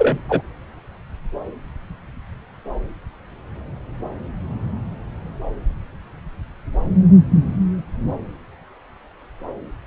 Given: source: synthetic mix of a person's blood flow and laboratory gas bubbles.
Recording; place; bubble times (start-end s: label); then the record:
Doppler ultrasound of blood flow; subclavian vein
0.00-0.17 s: bubbles
0.29-0.42 s: bubbles
From the record:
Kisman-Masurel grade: 213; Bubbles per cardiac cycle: several, 3 to 8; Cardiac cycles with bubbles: 1 to 10%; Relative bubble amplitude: loud (0.450 to 0.775); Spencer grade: 1 (occasional bubble signal discernible with the cardiac motion signal, with majority of cardiac periods free of bubbles); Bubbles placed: anywhere in the cardiac cycle